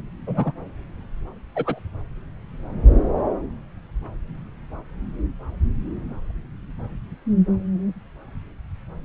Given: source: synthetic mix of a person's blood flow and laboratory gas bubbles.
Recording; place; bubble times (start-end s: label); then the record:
Doppler ultrasound of blood flow; subclavian vein
0.27-0.52 s: bubbles
1.55-1.79 s: bubbles
From the record:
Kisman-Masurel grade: 122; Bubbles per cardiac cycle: 1 to 2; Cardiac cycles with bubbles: 10 to 50%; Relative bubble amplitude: moderate (0.250 to 0.450); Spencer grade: 2 (many but less than half of the cardiac periods contain bubble signals, singularly or in groups); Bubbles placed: anywhere in the cardiac cycle